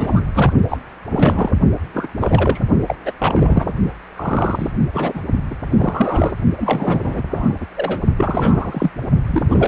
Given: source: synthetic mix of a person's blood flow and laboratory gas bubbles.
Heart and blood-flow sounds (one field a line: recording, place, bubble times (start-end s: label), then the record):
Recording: Doppler ultrasound of blood flow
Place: precordium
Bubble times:
0.00-0.26 s: bubbles
0.34-0.52 s: bubbles
0.70-0.78 s: bubbles
1.10-1.53 s: bubbles
1.93-2.07 s: bubbles
2.18-2.59 s: bubbles
2.86-2.95 s: bubbles
3.05-3.11 s: bubbles
3.19-3.74 s: bubbles
4.14-4.71 s: bubbles
4.93-5.21 s: bubbles
5.50-5.54 s: bubbles
5.70-6.35 s: bubbles
6.56-7.54 s: bubbles
7.60-7.66 s: bubbles
7.76-8.00 s: bubbles
8.18-8.90 s: bubbles
9.26-9.68 s: bubbles
From the record:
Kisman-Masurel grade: 342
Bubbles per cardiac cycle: rolling drumbeat, 9 or more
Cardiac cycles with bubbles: 100%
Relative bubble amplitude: moderate (0.250 to 0.450)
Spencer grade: 3 (all of the cardiac periods contain showers or single bubble signals, but not dominating or overriding the cardiac motion signals)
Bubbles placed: only in the low amplitude regions of the cardiac cycle